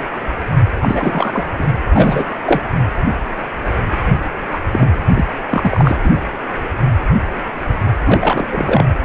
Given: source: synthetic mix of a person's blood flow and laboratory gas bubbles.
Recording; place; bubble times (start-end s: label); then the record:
Doppler ultrasound of blood flow; precordium
0.82-1.46 s: bubbles
1.58-1.67 s: bubbles
1.91-2.24 s: bubbles
2.45-2.61 s: bubbles
2.64-2.69 s: bubbles
4.52-4.57 s: bubbles
4.72-4.96 s: bubbles
5.08-5.26 s: bubbles
5.49-5.97 s: bubbles
6.04-6.12 s: bubbles
8.05-8.46 s: bubbles
8.51-8.84 s: bubbles
From the record:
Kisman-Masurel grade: 333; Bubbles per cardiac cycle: rolling drumbeat, 9 or more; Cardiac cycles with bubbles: 50 to 99%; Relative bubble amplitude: loud (0.450 to 0.775); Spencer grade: 3 (all of the cardiac periods contain showers or single bubble signals, but not dominating or overriding the cardiac motion signals); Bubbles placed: anywhere in the cardiac cycle